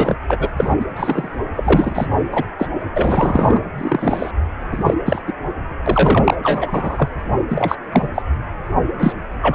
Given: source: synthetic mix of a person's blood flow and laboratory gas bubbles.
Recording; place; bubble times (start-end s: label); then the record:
Doppler ultrasound of blood flow; precordium
0.00-0.15 s: bubbles
0.29-0.49 s: bubbles
0.56-0.75 s: bubbles
0.80-0.85 s: bubbles
0.96-1.40 s: bubbles
1.56-2.07 s: bubbles
2.31-2.45 s: bubbles
2.58-2.67 s: bubbles
2.93-3.61 s: bubbles
3.78-4.31 s: bubbles
4.71-4.94 s: bubbles
5.05-5.22 s: bubbles
5.27-5.33 s: bubbles
5.86-6.36 s: bubbles
6.43-7.09 s: bubbles
7.49-7.75 s: bubbles
7.92-8.08 s: bubbles
8.15-8.22 s: bubbles
8.99-9.15 s: bubbles
9.41-9.55 s: bubbles
From the record:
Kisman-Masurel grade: 243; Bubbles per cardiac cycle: several, 3 to 8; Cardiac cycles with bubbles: 100%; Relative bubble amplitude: loud (0.450 to 0.775); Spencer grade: 3 (all of the cardiac periods contain showers or single bubble signals, but not dominating or overriding the cardiac motion signals); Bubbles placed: anywhere in the cardiac cycle